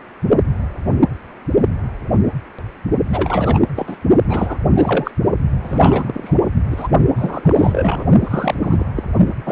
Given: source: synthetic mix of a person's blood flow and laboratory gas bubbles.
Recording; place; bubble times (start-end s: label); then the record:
Doppler ultrasound of blood flow; precordium
3.12-3.65 s: bubbles
3.74-3.96 s: bubbles
4.27-4.58 s: bubbles
4.75-5.11 s: bubbles
5.62-6.38 s: bubbles
6.71-6.88 s: bubbles
7.16-8.05 s: bubbles
8.24-8.55 s: bubbles
8.61-8.84 s: bubbles
8.96-9.03 s: bubbles
9.15-9.28 s: bubbles
9.46-9.51 s: bubbles
From the record:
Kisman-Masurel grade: 333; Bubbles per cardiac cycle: rolling drumbeat, 9 or more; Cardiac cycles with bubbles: 50 to 99%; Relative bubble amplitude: loud (0.450 to 0.775); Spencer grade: 3 (all of the cardiac periods contain showers or single bubble signals, but not dominating or overriding the cardiac motion signals); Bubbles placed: only in the low amplitude regions of the cardiac cycle